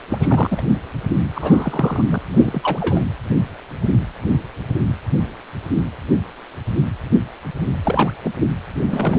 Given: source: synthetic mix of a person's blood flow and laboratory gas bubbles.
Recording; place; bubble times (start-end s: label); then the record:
Doppler ultrasound of blood flow; precordium
0.09-0.62 s: bubbles
1.35-2.03 s: bubbles
2.11-2.18 s: bubbles
2.29-3.05 s: bubbles
7.83-8.12 s: bubbles
8.21-8.31 s: bubbles
8.83-9.19 s: bubbles
From the record:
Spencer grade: 2 (many but less than half of the cardiac periods contain bubble signals, singularly or in groups); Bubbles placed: anywhere in the cardiac cycle